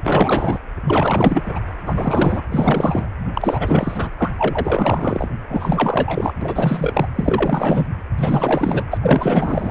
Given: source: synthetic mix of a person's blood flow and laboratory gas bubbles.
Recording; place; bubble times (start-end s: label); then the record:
Doppler ultrasound of blood flow; precordium
0.04-0.59 s: bubbles
0.86-1.59 s: bubbles
1.85-2.42 s: bubbles
2.51-3.08 s: bubbles
3.33-4.10 s: bubbles
4.18-4.31 s: bubbles
4.38-5.29 s: bubbles
5.48-6.33 s: bubbles
6.41-7.08 s: bubbles
7.15-7.87 s: bubbles
8.18-8.84 s: bubbles
8.92-8.98 s: bubbles
9.03-9.71 s: bubbles
From the record:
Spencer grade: 4 (maximum detectable bubble signal sounding continuously throughout systole and diastole of every cardiac period, and overriding the amplitude of the normal cardiac signals); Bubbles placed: anywhere in the cardiac cycle